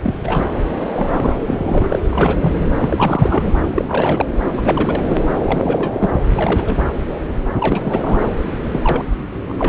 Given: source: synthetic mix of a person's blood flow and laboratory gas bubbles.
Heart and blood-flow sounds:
Doppler ultrasound of blood flow; subclavian vein
0.02-0.14 s: bubbles
0.24-0.47 s: bubbles
0.54-0.58 s: bubbles
0.95-1.37 s: bubbles
1.42-1.99 s: bubbles
2.10-2.69 s: bubbles
2.77-3.51 s: bubbles
3.73-4.27 s: bubbles
4.57-5.16 s: bubbles
5.43-6.09 s: bubbles
6.25-6.85 s: bubbles
7.58-8.29 s: bubbles
8.72-9.04 s: bubbles
9.48-9.69 s: bubbles
From the record:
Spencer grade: 3 (all of the cardiac periods contain showers or single bubble signals, but not dominating or overriding the cardiac motion signals); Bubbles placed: anywhere in the cardiac cycle

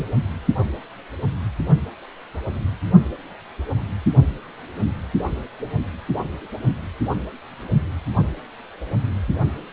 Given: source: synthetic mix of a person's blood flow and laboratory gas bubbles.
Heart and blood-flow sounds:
Doppler ultrasound of blood flow; precordium
0.00-0.11 s: bubbles
From the record:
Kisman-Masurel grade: 212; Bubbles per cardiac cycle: several, 3 to 8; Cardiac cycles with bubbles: 1 to 10%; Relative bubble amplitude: moderate (0.250 to 0.450); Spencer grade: 1 (occasional bubble signal discernible with the cardiac motion signal, with majority of cardiac periods free of bubbles); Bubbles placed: only in the low amplitude regions of the cardiac cycle

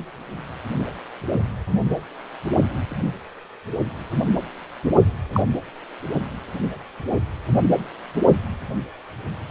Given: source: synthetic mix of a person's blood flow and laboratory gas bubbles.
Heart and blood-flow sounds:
Doppler ultrasound of blood flow; precordium
5.33-5.42 s: bubbles
From the record:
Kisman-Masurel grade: 112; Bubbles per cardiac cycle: 1 to 2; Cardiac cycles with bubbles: 1 to 10%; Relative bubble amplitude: moderate (0.250 to 0.450); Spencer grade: 1 (occasional bubble signal discernible with the cardiac motion signal, with majority of cardiac periods free of bubbles); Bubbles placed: only in the low amplitude regions of the cardiac cycle

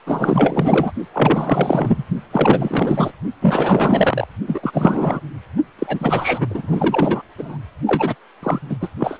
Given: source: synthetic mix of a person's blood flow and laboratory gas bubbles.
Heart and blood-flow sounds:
Doppler ultrasound of blood flow; precordium
0.06-0.92 s: bubbles
1.13-2.03 s: bubbles
2.31-3.12 s: bubbles
3.41-4.28 s: bubbles
4.47-5.21 s: bubbles
5.79-6.47 s: bubbles
6.50-7.22 s: bubbles
7.38-7.58 s: bubbles
7.86-8.15 s: bubbles
8.42-8.59 s: bubbles
8.69-8.76 s: bubbles
8.81-8.88 s: bubbles
8.99-9.19 s: bubbles
From the record:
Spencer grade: 4 (maximum detectable bubble signal sounding continuously throughout systole and diastole of every cardiac period, and overriding the amplitude of the normal cardiac signals); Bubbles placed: only in the low amplitude regions of the cardiac cycle

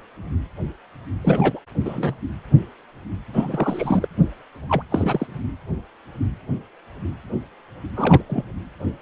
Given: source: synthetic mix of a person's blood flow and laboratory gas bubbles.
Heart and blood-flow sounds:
Doppler ultrasound of blood flow; precordium
1.23-1.59 s: bubbles
1.85-2.16 s: bubbles
3.33-4.08 s: bubbles
4.68-4.83 s: bubbles
4.89-5.27 s: bubbles
7.96-8.22 s: bubbles
8.29-8.44 s: bubbles
From the record:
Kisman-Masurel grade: 232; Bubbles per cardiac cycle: several, 3 to 8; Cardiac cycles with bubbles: 50 to 99%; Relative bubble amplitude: moderate (0.250 to 0.450); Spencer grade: 3 (all of the cardiac periods contain showers or single bubble signals, but not dominating or overriding the cardiac motion signals); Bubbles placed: anywhere in the cardiac cycle

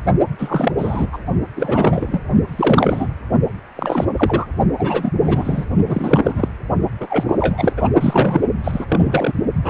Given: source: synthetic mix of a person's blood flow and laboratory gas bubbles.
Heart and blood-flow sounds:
Doppler ultrasound of blood flow; precordium
0.39-0.72 s: bubbles
0.77-1.06 s: bubbles
1.12-1.18 s: bubbles
1.56-2.21 s: bubbles
2.46-3.13 s: bubbles
3.75-4.05 s: bubbles
4.16-4.46 s: bubbles
4.78-5.12 s: bubbles
5.17-5.66 s: bubbles
5.87-6.48 s: bubbles
7.00-7.72 s: bubbles
7.77-7.88 s: bubbles
8.01-8.42 s: bubbles
8.64-8.86 s: bubbles
8.88-9.33 s: bubbles
9.62-9.70 s: bubbles
From the record:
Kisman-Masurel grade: 343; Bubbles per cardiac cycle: rolling drumbeat, 9 or more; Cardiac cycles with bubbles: 100%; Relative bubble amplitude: loud (0.450 to 0.775); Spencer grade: 3 (all of the cardiac periods contain showers or single bubble signals, but not dominating or overriding the cardiac motion signals); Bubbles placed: only in the low amplitude regions of the cardiac cycle

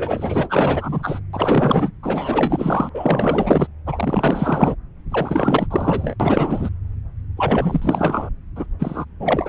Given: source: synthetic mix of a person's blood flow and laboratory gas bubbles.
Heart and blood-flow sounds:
Doppler ultrasound of blood flow; subclavian vein
0.00-1.20 s: bubbles
1.33-1.92 s: bubbles
2.02-2.90 s: bubbles
2.93-3.67 s: bubbles
3.86-4.75 s: bubbles
5.10-5.67 s: bubbles
5.70-6.15 s: bubbles
6.19-6.69 s: bubbles
7.37-8.29 s: bubbles
8.56-8.67 s: bubbles
8.79-9.05 s: bubbles
9.19-9.49 s: bubbles
From the record:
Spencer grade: 4 (maximum detectable bubble signal sounding continuously throughout systole and diastole of every cardiac period, and overriding the amplitude of the normal cardiac signals); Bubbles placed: anywhere in the cardiac cycle

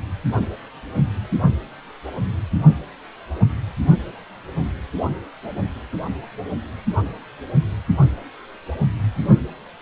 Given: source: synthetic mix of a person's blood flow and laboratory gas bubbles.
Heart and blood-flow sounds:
Doppler ultrasound of blood flow; precordium
no bubbles
From the record:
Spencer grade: 0 (complete lack of bubble signals)

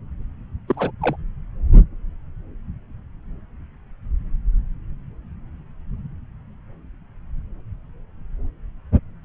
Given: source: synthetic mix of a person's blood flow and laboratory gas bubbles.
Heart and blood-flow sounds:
Doppler ultrasound of blood flow; subclavian vein
0.68-0.91 s: bubbles
1.01-1.16 s: bubbles
From the record:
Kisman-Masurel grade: 212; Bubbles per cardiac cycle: several, 3 to 8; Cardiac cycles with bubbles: 1 to 10%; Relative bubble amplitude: moderate (0.250 to 0.450); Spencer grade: 1 (occasional bubble signal discernible with the cardiac motion signal, with majority of cardiac periods free of bubbles); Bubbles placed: anywhere in the cardiac cycle

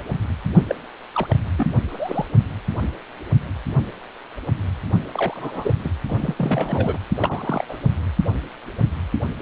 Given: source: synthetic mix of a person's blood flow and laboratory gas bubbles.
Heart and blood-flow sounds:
Doppler ultrasound of blood flow; precordium
0.69-0.75 s: bubbles
1.15-1.37 s: bubbles
1.56-1.73 s: bubbles
1.89-2.28 s: bubbles
5.15-5.73 s: bubbles
5.84-5.89 s: bubbles
6.07-6.34 s: bubbles
6.36-6.98 s: bubbles
7.17-7.79 s: bubbles
From the record:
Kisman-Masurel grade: 222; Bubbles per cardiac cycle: several, 3 to 8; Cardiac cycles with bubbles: 10 to 50%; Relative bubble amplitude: moderate (0.250 to 0.450); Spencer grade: 2 (many but less than half of the cardiac periods contain bubble signals, singularly or in groups); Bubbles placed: only in the low amplitude regions of the cardiac cycle

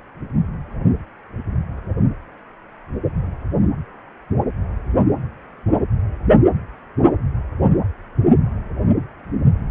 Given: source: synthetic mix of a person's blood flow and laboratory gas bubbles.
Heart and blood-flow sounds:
Doppler ultrasound of blood flow; precordium
3.59-3.69 s: bubbles
From the record:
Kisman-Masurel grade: 111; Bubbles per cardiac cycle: 1 to 2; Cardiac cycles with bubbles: 1 to 10%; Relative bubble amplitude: barely perceptible (0.100 to 0.250); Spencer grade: 1 (occasional bubble signal discernible with the cardiac motion signal, with majority of cardiac periods free of bubbles); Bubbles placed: anywhere in the cardiac cycle

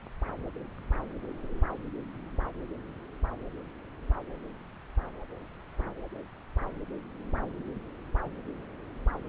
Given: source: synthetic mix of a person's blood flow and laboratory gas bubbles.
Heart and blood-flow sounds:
Doppler ultrasound of blood flow; subclavian vein
no bubbles
From the record:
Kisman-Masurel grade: 000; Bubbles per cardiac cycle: 0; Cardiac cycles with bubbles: 0%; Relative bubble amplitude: no bubbles discernible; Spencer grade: 0 (complete lack of bubble signals)

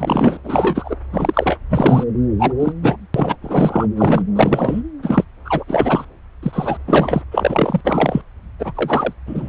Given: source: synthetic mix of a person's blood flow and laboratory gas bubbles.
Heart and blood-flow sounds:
Doppler ultrasound of blood flow; subclavian vein
0.00-0.38 s: bubbles
0.44-0.95 s: bubbles
1.12-1.57 s: bubbles
1.68-2.04 s: bubbles
2.39-2.53 s: bubbles
2.60-2.73 s: bubbles
2.82-2.97 s: bubbles
3.14-3.36 s: bubbles
3.42-3.87 s: bubbles
3.97-4.22 s: bubbles
4.36-4.82 s: bubbles
5.03-5.24 s: bubbles
5.45-5.64 s: bubbles
5.67-6.05 s: bubbles
6.42-6.77 s: bubbles
6.87-7.22 s: bubbles
7.32-7.80 s: bubbles
7.85-8.21 s: bubbles
8.59-9.13 s: bubbles
9.26-9.48 s: bubbles
From the record:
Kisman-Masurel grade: 243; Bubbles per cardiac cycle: several, 3 to 8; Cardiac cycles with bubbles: 100%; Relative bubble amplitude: loud (0.450 to 0.775); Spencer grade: 3 (all of the cardiac periods contain showers or single bubble signals, but not dominating or overriding the cardiac motion signals); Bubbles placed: anywhere in the cardiac cycle

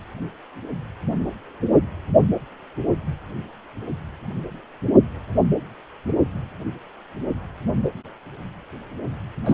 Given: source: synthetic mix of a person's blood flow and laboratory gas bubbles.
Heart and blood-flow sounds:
Doppler ultrasound of blood flow; precordium
9.45-9.54 s: bubbles
From the record:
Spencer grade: 1 (occasional bubble signal discernible with the cardiac motion signal, with majority of cardiac periods free of bubbles); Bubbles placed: only in the low amplitude regions of the cardiac cycle

